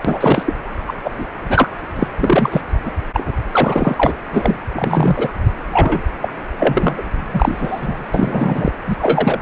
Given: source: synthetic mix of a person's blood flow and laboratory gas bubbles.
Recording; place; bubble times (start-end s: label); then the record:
Doppler ultrasound of blood flow; precordium
0.04-0.43 s: bubbles
0.46-0.54 s: bubbles
0.88-0.94 s: bubbles
1.04-1.28 s: bubbles
1.49-1.69 s: bubbles
1.95-2.07 s: bubbles
2.17-2.61 s: bubbles
2.85-2.92 s: bubbles
3.13-3.23 s: bubbles
3.51-4.12 s: bubbles
4.24-4.59 s: bubbles
4.74-5.31 s: bubbles
5.72-6.01 s: bubbles
6.22-6.33 s: bubbles
6.58-7.02 s: bubbles
7.33-8.06 s: bubbles
8.14-8.71 s: bubbles
8.87-8.96 s: bubbles
8.99-9.40 s: bubbles
From the record:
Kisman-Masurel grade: 243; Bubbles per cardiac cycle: several, 3 to 8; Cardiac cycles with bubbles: 100%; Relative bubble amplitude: loud (0.450 to 0.775); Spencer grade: 3 (all of the cardiac periods contain showers or single bubble signals, but not dominating or overriding the cardiac motion signals); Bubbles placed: anywhere in the cardiac cycle